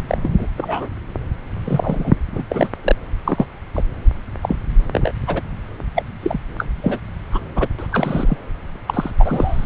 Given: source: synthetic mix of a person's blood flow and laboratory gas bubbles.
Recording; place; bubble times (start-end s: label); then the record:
Doppler ultrasound of blood flow; subclavian vein
0.08-0.46 s: bubbles
0.57-0.89 s: bubbles
1.65-2.14 s: bubbles
2.32-2.43 s: bubbles
2.50-2.70 s: bubbles
2.83-2.96 s: bubbles
3.25-3.46 s: bubbles
3.73-3.83 s: bubbles
4.42-4.56 s: bubbles
4.92-5.12 s: bubbles
5.26-5.42 s: bubbles
5.96-6.03 s: bubbles
6.22-6.39 s: bubbles
6.58-6.66 s: bubbles
6.82-6.99 s: bubbles
7.31-7.41 s: bubbles
7.55-7.67 s: bubbles
7.79-7.87 s: bubbles
7.92-8.37 s: bubbles
8.87-9.11 s: bubbles
9.19-9.66 s: bubbles
From the record:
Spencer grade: 3 (all of the cardiac periods contain showers or single bubble signals, but not dominating or overriding the cardiac motion signals); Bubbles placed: anywhere in the cardiac cycle